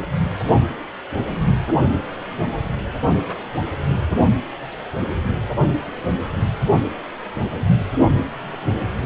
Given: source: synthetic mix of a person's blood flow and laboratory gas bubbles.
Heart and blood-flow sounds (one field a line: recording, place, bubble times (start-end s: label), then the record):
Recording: Doppler ultrasound of blood flow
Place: precordium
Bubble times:
no bubbles
From the record:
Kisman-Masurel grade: 000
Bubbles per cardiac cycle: 0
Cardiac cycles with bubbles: 0%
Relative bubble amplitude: no bubbles discernible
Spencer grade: 0 (complete lack of bubble signals)